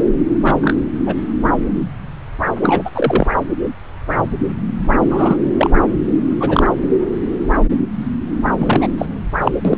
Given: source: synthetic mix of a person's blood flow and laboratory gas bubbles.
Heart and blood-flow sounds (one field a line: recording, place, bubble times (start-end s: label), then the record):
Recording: Doppler ultrasound of blood flow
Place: subclavian vein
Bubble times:
0.44-0.55 s: bubbles
0.61-0.73 s: bubbles
1.06-1.15 s: bubbles
2.61-2.90 s: bubbles
2.94-3.27 s: bubbles
5.10-5.37 s: bubbles
5.57-5.70 s: bubbles
6.40-6.70 s: bubbles
8.58-8.88 s: bubbles
8.97-9.05 s: bubbles
9.41-9.51 s: bubbles
9.64-9.77 s: bubbles
From the record:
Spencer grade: 3 (all of the cardiac periods contain showers or single bubble signals, but not dominating or overriding the cardiac motion signals)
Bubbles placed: anywhere in the cardiac cycle